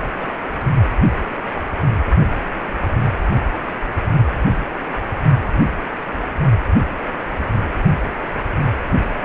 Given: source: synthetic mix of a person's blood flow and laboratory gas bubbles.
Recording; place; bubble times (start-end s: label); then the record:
Doppler ultrasound of blood flow; precordium
0.19-0.29 s: bubbles
From the record:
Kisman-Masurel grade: 121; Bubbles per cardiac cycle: 1 to 2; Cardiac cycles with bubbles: 10 to 50%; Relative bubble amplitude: barely perceptible (0.100 to 0.250); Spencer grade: 2 (many but less than half of the cardiac periods contain bubble signals, singularly or in groups); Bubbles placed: only in the low amplitude regions of the cardiac cycle